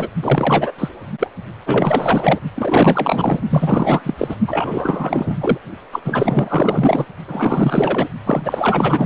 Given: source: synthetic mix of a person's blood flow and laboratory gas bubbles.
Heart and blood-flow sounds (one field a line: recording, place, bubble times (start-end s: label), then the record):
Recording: Doppler ultrasound of blood flow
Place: precordium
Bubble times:
0.00-0.09 s: bubbles
0.22-0.72 s: bubbles
0.78-0.89 s: bubbles
1.20-1.28 s: bubbles
1.66-2.40 s: bubbles
2.54-3.40 s: bubbles
3.49-4.14 s: bubbles
4.17-4.36 s: bubbles
4.47-5.58 s: bubbles
5.92-6.00 s: bubbles
6.04-7.06 s: bubbles
7.28-8.09 s: bubbles
8.25-9.06 s: bubbles
From the record:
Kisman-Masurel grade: 444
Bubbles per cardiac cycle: continuous sound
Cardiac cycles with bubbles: 100%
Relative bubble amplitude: maximal (0.775 to 0.999)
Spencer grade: 4 (maximum detectable bubble signal sounding continuously throughout systole and diastole of every cardiac period, and overriding the amplitude of the normal cardiac signals)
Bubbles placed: only in the low amplitude regions of the cardiac cycle